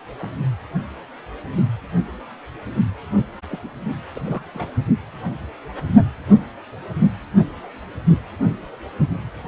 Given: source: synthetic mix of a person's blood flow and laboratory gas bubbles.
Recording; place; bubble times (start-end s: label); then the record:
Doppler ultrasound of blood flow; precordium
0.20-0.29 s: bubbles
3.49-3.59 s: bubbles
3.62-3.71 s: bubbles
4.15-4.42 s: bubbles
4.54-4.67 s: bubbles
From the record:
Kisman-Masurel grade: 221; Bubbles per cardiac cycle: several, 3 to 8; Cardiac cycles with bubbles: 10 to 50%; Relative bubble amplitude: barely perceptible (0.100 to 0.250); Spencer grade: 2 (many but less than half of the cardiac periods contain bubble signals, singularly or in groups); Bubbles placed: only in the low amplitude regions of the cardiac cycle